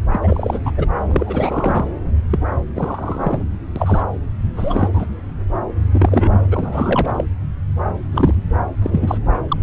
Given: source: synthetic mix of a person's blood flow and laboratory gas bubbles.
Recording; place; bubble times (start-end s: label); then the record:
Doppler ultrasound of blood flow; subclavian vein
0.12-0.20 s: bubbles
0.23-0.59 s: bubbles
0.65-0.72 s: bubbles
0.77-0.86 s: bubbles
1.10-1.88 s: bubbles
2.30-2.40 s: bubbles
2.75-3.44 s: bubbles
3.75-4.03 s: bubbles
4.54-4.88 s: bubbles
4.93-5.07 s: bubbles
5.94-6.41 s: bubbles
6.50-7.25 s: bubbles
8.11-8.34 s: bubbles
8.82-9.17 s: bubbles
9.48-9.57 s: bubbles
From the record:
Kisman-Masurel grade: 243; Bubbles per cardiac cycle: several, 3 to 8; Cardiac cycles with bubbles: 100%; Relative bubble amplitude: loud (0.450 to 0.775); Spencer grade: 3 (all of the cardiac periods contain showers or single bubble signals, but not dominating or overriding the cardiac motion signals); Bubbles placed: anywhere in the cardiac cycle